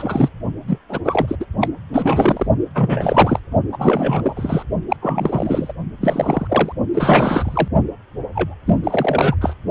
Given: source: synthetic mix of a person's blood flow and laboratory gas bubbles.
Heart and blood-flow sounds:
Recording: Doppler ultrasound of blood flow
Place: precordium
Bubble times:
0.00-0.29 s: bubbles
0.67-0.78 s: bubbles
0.89-0.99 s: bubbles
1.04-1.35 s: bubbles
1.40-1.46 s: bubbles
1.60-1.70 s: bubbles
1.93-2.46 s: bubbles
2.75-3.40 s: bubbles
3.72-4.63 s: bubbles
4.89-4.97 s: bubbles
5.02-5.73 s: bubbles
6.00-6.73 s: bubbles
6.94-7.68 s: bubbles
8.33-8.55 s: bubbles
8.67-8.79 s: bubbles
8.84-9.36 s: bubbles
9.41-9.55 s: bubbles
From the record:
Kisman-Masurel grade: 333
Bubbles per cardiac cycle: rolling drumbeat, 9 or more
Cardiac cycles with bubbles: 50 to 99%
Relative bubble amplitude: loud (0.450 to 0.775)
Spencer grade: 3 (all of the cardiac periods contain showers or single bubble signals, but not dominating or overriding the cardiac motion signals)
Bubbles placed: only in the low amplitude regions of the cardiac cycle

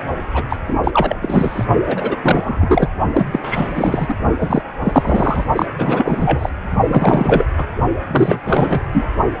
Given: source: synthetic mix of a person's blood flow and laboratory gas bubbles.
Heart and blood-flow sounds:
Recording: Doppler ultrasound of blood flow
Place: precordium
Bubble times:
0.00-0.03 s: bubbles
0.34-0.44 s: bubbles
0.49-0.58 s: bubbles
0.67-1.17 s: bubbles
1.22-1.65 s: bubbles
1.87-2.17 s: bubbles
2.22-2.89 s: bubbles
3.12-3.40 s: bubbles
3.43-4.14 s: bubbles
4.40-4.64 s: bubbles
4.85-5.45 s: bubbles
5.55-5.66 s: bubbles
5.79-6.49 s: bubbles
6.88-7.46 s: bubbles
7.56-7.68 s: bubbles
8.11-8.40 s: bubbles
8.45-8.82 s: bubbles
8.91-9.08 s: bubbles
From the record:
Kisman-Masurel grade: 343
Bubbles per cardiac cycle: rolling drumbeat, 9 or more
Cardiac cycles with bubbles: 100%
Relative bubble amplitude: loud (0.450 to 0.775)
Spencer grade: 3 (all of the cardiac periods contain showers or single bubble signals, but not dominating or overriding the cardiac motion signals)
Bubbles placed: only in the low amplitude regions of the cardiac cycle

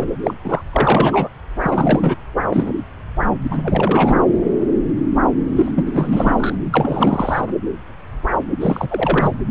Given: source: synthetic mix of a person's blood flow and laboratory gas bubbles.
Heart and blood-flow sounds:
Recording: Doppler ultrasound of blood flow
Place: subclavian vein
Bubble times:
0.00-0.07 s: bubbles
0.24-0.34 s: bubbles
0.44-0.61 s: bubbles
0.72-1.28 s: bubbles
1.62-2.15 s: bubbles
2.49-2.73 s: bubbles
3.51-3.58 s: bubbles
3.62-4.22 s: bubbles
5.55-5.71 s: bubbles
5.75-6.55 s: bubbles
6.71-7.47 s: bubbles
8.61-9.31 s: bubbles
From the record:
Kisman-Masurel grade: 333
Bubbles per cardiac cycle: rolling drumbeat, 9 or more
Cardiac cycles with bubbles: 50 to 99%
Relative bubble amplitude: loud (0.450 to 0.775)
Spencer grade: 3 (all of the cardiac periods contain showers or single bubble signals, but not dominating or overriding the cardiac motion signals)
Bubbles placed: anywhere in the cardiac cycle

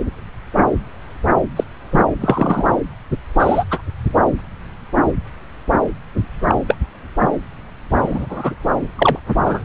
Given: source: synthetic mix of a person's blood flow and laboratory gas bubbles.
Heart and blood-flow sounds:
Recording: Doppler ultrasound of blood flow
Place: subclavian vein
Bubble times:
1.56-1.64 s: bubbles
1.92-2.02 s: bubbles
2.20-2.65 s: bubbles
3.39-3.64 s: bubbles
3.70-3.81 s: bubbles
6.47-6.55 s: bubbles
6.67-6.75 s: bubbles
7.96-8.52 s: bubbles
8.97-9.18 s: bubbles
9.45-9.64 s: bubbles
From the record:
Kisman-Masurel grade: 123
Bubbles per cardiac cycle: 1 to 2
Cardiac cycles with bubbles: 10 to 50%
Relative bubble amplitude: loud (0.450 to 0.775)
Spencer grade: 2 (many but less than half of the cardiac periods contain bubble signals, singularly or in groups)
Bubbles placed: anywhere in the cardiac cycle

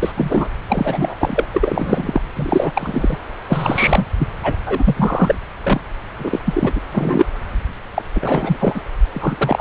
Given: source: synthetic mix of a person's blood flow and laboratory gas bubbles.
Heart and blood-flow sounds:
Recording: Doppler ultrasound of blood flow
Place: subclavian vein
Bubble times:
0.02-0.12 s: bubbles
0.15-0.48 s: bubbles
0.68-1.15 s: bubbles
1.19-1.47 s: bubbles
1.51-2.21 s: bubbles
2.35-2.72 s: bubbles
2.75-3.18 s: bubbles
3.49-4.05 s: bubbles
4.19-4.28 s: bubbles
4.43-4.56 s: bubbles
4.67-5.35 s: bubbles
5.63-5.80 s: bubbles
6.18-6.39 s: bubbles
6.46-6.72 s: bubbles
6.75-6.80 s: bubbles
6.92-7.26 s: bubbles
7.94-8.02 s: bubbles
8.15-8.57 s: bubbles
8.60-8.81 s: bubbles
9.14-9.61 s: bubbles
From the record:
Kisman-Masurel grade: 342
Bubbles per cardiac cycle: rolling drumbeat, 9 or more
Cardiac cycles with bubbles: 100%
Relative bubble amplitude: moderate (0.250 to 0.450)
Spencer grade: 3 (all of the cardiac periods contain showers or single bubble signals, but not dominating or overriding the cardiac motion signals)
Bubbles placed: anywhere in the cardiac cycle

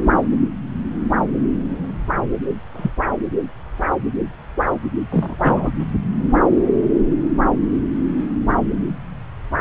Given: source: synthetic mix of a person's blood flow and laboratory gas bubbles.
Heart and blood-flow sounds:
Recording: Doppler ultrasound of blood flow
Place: subclavian vein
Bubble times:
2.77-2.91 s: bubbles
5.10-5.36 s: bubbles
5.39-5.70 s: bubbles
From the record:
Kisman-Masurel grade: 122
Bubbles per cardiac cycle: 1 to 2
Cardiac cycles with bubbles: 10 to 50%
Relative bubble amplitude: moderate (0.250 to 0.450)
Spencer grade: 2 (many but less than half of the cardiac periods contain bubble signals, singularly or in groups)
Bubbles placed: anywhere in the cardiac cycle

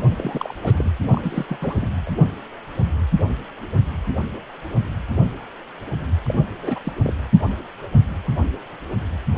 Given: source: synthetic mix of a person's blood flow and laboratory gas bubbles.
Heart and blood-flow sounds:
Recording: Doppler ultrasound of blood flow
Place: precordium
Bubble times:
0.16-0.54 s: bubbles
0.62-0.90 s: bubbles
1.10-1.46 s: bubbles
1.48-1.88 s: bubbles
2.06-2.10 s: bubbles
6.24-6.35 s: bubbles
6.62-6.79 s: bubbles
6.84-6.93 s: bubbles
7.04-7.13 s: bubbles
From the record:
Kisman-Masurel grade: 221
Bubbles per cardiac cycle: several, 3 to 8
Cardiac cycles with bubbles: 10 to 50%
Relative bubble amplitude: barely perceptible (0.100 to 0.250)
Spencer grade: 2 (many but less than half of the cardiac periods contain bubble signals, singularly or in groups)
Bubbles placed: anywhere in the cardiac cycle

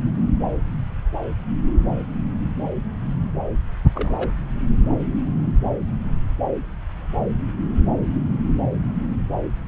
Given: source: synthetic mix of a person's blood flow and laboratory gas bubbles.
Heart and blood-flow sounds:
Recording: Doppler ultrasound of blood flow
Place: subclavian vein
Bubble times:
3.94-4.31 s: bubbles
From the record:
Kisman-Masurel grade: 211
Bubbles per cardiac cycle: several, 3 to 8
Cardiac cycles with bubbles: 1 to 10%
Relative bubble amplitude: barely perceptible (0.100 to 0.250)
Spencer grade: 1 (occasional bubble signal discernible with the cardiac motion signal, with majority of cardiac periods free of bubbles)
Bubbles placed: anywhere in the cardiac cycle

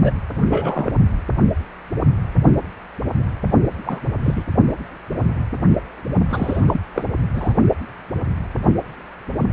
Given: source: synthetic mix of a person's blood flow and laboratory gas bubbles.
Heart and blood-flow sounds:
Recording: Doppler ultrasound of blood flow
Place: precordium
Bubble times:
0.04-0.11 s: bubbles
0.40-0.92 s: bubbles
3.84-4.00 s: bubbles
4.23-4.44 s: bubbles
6.29-6.61 s: bubbles
6.67-6.80 s: bubbles
6.94-7.03 s: bubbles
7.34-7.54 s: bubbles
From the record:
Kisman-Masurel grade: 222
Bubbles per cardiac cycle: several, 3 to 8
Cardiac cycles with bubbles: 10 to 50%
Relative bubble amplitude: moderate (0.250 to 0.450)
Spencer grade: 2 (many but less than half of the cardiac periods contain bubble signals, singularly or in groups)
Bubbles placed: only in the low amplitude regions of the cardiac cycle

